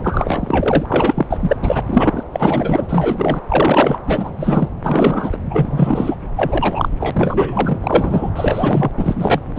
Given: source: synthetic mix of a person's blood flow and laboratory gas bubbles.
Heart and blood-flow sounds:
Doppler ultrasound of blood flow; subclavian vein
0.03-1.27 s: bubbles
1.30-1.57 s: bubbles
1.62-1.82 s: bubbles
1.86-2.23 s: bubbles
2.33-2.85 s: bubbles
2.89-3.40 s: bubbles
3.49-3.99 s: bubbles
4.07-4.32 s: bubbles
4.37-4.69 s: bubbles
4.83-5.37 s: bubbles
5.50-6.17 s: bubbles
6.36-6.88 s: bubbles
7.00-7.79 s: bubbles
7.83-8.29 s: bubbles
8.35-8.92 s: bubbles
8.97-9.41 s: bubbles
9.56-9.59 s: bubbles
From the record:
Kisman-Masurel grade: 343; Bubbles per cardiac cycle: rolling drumbeat, 9 or more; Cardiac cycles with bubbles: 100%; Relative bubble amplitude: loud (0.450 to 0.775); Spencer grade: 3 (all of the cardiac periods contain showers or single bubble signals, but not dominating or overriding the cardiac motion signals); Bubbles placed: anywhere in the cardiac cycle

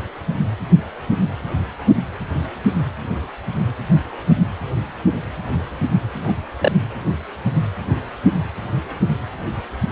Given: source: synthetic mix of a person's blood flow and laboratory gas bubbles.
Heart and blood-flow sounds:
Doppler ultrasound of blood flow; precordium
6.21-6.33 s: bubbles
6.60-6.71 s: bubbles
From the record:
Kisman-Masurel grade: 113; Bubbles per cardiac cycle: 1 to 2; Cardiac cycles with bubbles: 1 to 10%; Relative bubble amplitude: loud (0.450 to 0.775); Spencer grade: 1 (occasional bubble signal discernible with the cardiac motion signal, with majority of cardiac periods free of bubbles); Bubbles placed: anywhere in the cardiac cycle

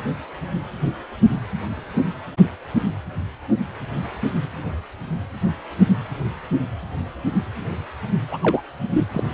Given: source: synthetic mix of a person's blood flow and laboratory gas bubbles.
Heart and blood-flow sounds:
Doppler ultrasound of blood flow; precordium
8.31-8.38 s: bubbles
8.41-8.62 s: bubbles
8.92-9.05 s: bubbles
9.12-9.23 s: bubbles
From the record:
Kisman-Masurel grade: 212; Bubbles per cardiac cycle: several, 3 to 8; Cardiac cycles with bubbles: 1 to 10%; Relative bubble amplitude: moderate (0.250 to 0.450); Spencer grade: 1 (occasional bubble signal discernible with the cardiac motion signal, with majority of cardiac periods free of bubbles); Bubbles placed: only in the low amplitude regions of the cardiac cycle

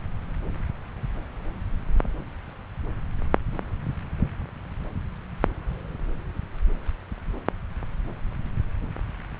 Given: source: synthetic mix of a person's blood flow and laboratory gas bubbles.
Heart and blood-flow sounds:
Doppler ultrasound of blood flow; subclavian vein
no bubbles
From the record:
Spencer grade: 0 (complete lack of bubble signals)

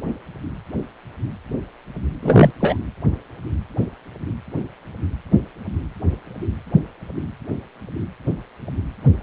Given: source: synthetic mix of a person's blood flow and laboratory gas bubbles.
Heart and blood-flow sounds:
Doppler ultrasound of blood flow; precordium
2.23-2.50 s: bubbles
2.60-2.77 s: bubbles
From the record:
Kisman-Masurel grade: 213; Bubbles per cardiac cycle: several, 3 to 8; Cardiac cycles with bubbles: 1 to 10%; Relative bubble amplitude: loud (0.450 to 0.775); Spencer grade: 1 (occasional bubble signal discernible with the cardiac motion signal, with majority of cardiac periods free of bubbles); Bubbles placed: anywhere in the cardiac cycle

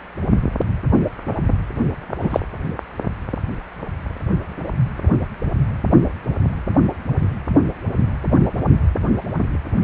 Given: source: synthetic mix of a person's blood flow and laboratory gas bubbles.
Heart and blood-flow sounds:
Doppler ultrasound of blood flow; precordium
2.19-2.40 s: bubbles
From the record:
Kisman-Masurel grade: 113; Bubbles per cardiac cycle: 1 to 2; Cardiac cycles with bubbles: 1 to 10%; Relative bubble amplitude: loud (0.450 to 0.775); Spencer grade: 1 (occasional bubble signal discernible with the cardiac motion signal, with majority of cardiac periods free of bubbles); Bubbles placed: only in the low amplitude regions of the cardiac cycle

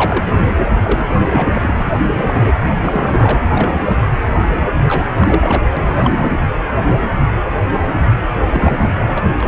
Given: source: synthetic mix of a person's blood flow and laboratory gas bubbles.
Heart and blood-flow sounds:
Doppler ultrasound of blood flow; precordium
0.00-0.25 s: bubbles
0.33-0.80 s: bubbles
0.83-1.06 s: bubbles
1.31-1.91 s: bubbles
2.04-2.52 s: bubbles
2.68-2.73 s: bubbles
2.81-3.40 s: bubbles
3.48-3.97 s: bubbles
4.54-4.70 s: bubbles
4.74-5.62 s: bubbles
5.76-6.31 s: bubbles
8.33-8.46 s: bubbles
8.50-9.32 s: bubbles
9.40-9.47 s: bubbles
From the record:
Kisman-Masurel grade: 332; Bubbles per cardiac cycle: rolling drumbeat, 9 or more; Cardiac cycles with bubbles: 50 to 99%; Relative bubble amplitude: moderate (0.250 to 0.450); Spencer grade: 3 (all of the cardiac periods contain showers or single bubble signals, but not dominating or overriding the cardiac motion signals); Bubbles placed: anywhere in the cardiac cycle

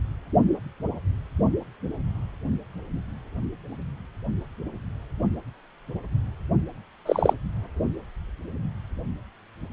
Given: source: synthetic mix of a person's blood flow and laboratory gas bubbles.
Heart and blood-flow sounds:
Doppler ultrasound of blood flow; precordium
7.05-7.33 s: bubbles
From the record:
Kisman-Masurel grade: 113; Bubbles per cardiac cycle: 1 to 2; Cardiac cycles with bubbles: 1 to 10%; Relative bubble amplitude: loud (0.450 to 0.775); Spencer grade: 1 (occasional bubble signal discernible with the cardiac motion signal, with majority of cardiac periods free of bubbles); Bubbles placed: only in the low amplitude regions of the cardiac cycle

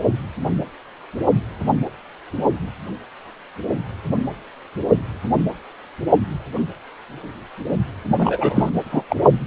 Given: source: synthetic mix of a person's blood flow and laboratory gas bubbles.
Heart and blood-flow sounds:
Doppler ultrasound of blood flow; precordium
8.18-8.71 s: bubbles
8.91-9.04 s: bubbles
9.09-9.15 s: bubbles
From the record:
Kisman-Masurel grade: 213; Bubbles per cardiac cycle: several, 3 to 8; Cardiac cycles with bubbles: 1 to 10%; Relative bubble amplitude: loud (0.450 to 0.775); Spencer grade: 1 (occasional bubble signal discernible with the cardiac motion signal, with majority of cardiac periods free of bubbles); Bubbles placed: only in the low amplitude regions of the cardiac cycle

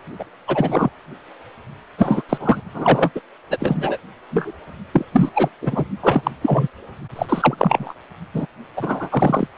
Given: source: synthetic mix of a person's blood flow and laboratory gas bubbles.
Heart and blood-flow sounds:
Doppler ultrasound of blood flow; precordium
0.19-0.25 s: bubbles
0.47-0.90 s: bubbles
1.98-2.22 s: bubbles
2.29-2.61 s: bubbles
2.74-3.10 s: bubbles
3.15-3.20 s: bubbles
3.50-3.57 s: bubbles
3.59-3.97 s: bubbles
4.31-4.52 s: bubbles
4.93-5.06 s: bubbles
5.13-5.29 s: bubbles
5.35-5.49 s: bubbles
5.61-5.85 s: bubbles
6.02-6.31 s: bubbles
6.41-6.67 s: bubbles
7.16-7.26 s: bubbles
7.29-7.93 s: bubbles
8.33-8.46 s: bubbles
8.76-9.08 s: bubbles
9.11-9.47 s: bubbles
From the record:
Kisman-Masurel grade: 243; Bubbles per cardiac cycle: several, 3 to 8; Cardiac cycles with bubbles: 100%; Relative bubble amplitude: loud (0.450 to 0.775); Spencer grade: 3 (all of the cardiac periods contain showers or single bubble signals, but not dominating or overriding the cardiac motion signals); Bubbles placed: only in the low amplitude regions of the cardiac cycle

